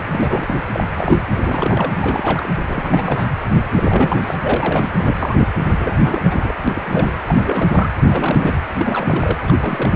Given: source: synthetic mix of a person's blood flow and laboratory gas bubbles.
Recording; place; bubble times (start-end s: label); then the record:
Doppler ultrasound of blood flow; precordium
0.00-0.07 s: bubbles
0.12-0.55 s: bubbles
0.73-0.88 s: bubbles
0.94-1.18 s: bubbles
1.33-1.93 s: bubbles
1.98-2.48 s: bubbles
2.67-3.27 s: bubbles
3.75-4.36 s: bubbles
4.38-4.92 s: bubbles
4.97-5.48 s: bubbles
5.79-6.54 s: bubbles
6.67-7.13 s: bubbles
7.28-7.89 s: bubbles
8.09-8.54 s: bubbles
8.79-9.36 s: bubbles
9.43-9.54 s: bubbles
9.59-9.96 s: bubbles
From the record:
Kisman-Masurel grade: 342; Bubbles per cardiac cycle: rolling drumbeat, 9 or more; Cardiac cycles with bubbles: 100%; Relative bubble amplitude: moderate (0.250 to 0.450); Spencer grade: 3 (all of the cardiac periods contain showers or single bubble signals, but not dominating or overriding the cardiac motion signals); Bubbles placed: anywhere in the cardiac cycle